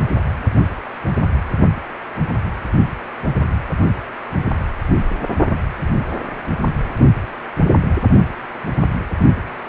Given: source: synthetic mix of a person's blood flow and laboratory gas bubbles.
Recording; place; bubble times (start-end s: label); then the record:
Doppler ultrasound of blood flow; precordium
no bubbles
From the record:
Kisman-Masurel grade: 000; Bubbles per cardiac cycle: 0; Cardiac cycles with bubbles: 0%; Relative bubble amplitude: no bubbles discernible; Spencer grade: 0 (complete lack of bubble signals)